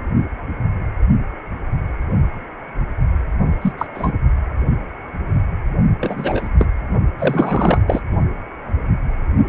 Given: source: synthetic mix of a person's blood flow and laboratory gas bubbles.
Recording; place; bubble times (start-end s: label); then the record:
Doppler ultrasound of blood flow; precordium
3.61-3.73 s: bubbles
3.77-3.87 s: bubbles
3.95-4.12 s: bubbles
6.01-6.50 s: bubbles
6.59-6.67 s: bubbles
7.19-7.83 s: bubbles
7.87-8.02 s: bubbles
From the record:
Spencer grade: 2 (many but less than half of the cardiac periods contain bubble signals, singularly or in groups); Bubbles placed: only in the low amplitude regions of the cardiac cycle